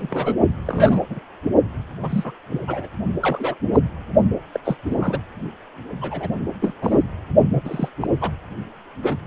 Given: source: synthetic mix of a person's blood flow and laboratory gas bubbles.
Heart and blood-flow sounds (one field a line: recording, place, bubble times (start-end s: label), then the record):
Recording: Doppler ultrasound of blood flow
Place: precordium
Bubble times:
0.00-0.34 s: bubbles
0.65-1.01 s: bubbles
1.09-1.20 s: bubbles
2.01-2.32 s: bubbles
2.50-2.61 s: bubbles
2.67-2.88 s: bubbles
3.21-3.55 s: bubbles
3.73-3.80 s: bubbles
4.54-4.60 s: bubbles
4.64-4.76 s: bubbles
4.88-5.19 s: bubbles
6.01-6.29 s: bubbles
6.61-6.74 s: bubbles
6.82-7.00 s: bubbles
7.53-7.62 s: bubbles
7.65-7.89 s: bubbles
8.00-8.08 s: bubbles
8.21-8.30 s: bubbles
9.02-9.17 s: bubbles
From the record:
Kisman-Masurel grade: 242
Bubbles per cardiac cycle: several, 3 to 8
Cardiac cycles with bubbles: 100%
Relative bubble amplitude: moderate (0.250 to 0.450)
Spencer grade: 3 (all of the cardiac periods contain showers or single bubble signals, but not dominating or overriding the cardiac motion signals)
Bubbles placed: only in the low amplitude regions of the cardiac cycle